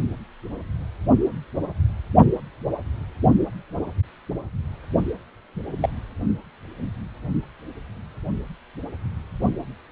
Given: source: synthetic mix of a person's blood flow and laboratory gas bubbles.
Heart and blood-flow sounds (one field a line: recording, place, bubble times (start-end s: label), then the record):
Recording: Doppler ultrasound of blood flow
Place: precordium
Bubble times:
5.81-5.89 s: bubbles
From the record:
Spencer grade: 1 (occasional bubble signal discernible with the cardiac motion signal, with majority of cardiac periods free of bubbles)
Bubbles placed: only in the low amplitude regions of the cardiac cycle